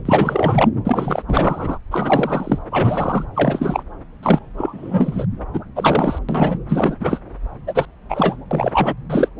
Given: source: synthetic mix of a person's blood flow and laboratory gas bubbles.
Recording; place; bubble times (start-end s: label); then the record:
Doppler ultrasound of blood flow; subclavian vein
0.05-0.69 s: bubbles
0.85-1.23 s: bubbles
1.28-1.78 s: bubbles
1.91-2.59 s: bubbles
2.71-3.25 s: bubbles
3.34-3.83 s: bubbles
4.22-4.39 s: bubbles
4.56-5.25 s: bubbles
5.53-5.59 s: bubbles
5.75-6.18 s: bubbles
6.28-6.58 s: bubbles
6.68-6.96 s: bubbles
7.00-7.21 s: bubbles
7.67-7.85 s: bubbles
8.09-8.36 s: bubbles
8.51-8.94 s: bubbles
9.10-9.29 s: bubbles
From the record:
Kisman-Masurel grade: 343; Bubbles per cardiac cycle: rolling drumbeat, 9 or more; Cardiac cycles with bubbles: 100%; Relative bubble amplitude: loud (0.450 to 0.775); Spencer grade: 3 (all of the cardiac periods contain showers or single bubble signals, but not dominating or overriding the cardiac motion signals); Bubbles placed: anywhere in the cardiac cycle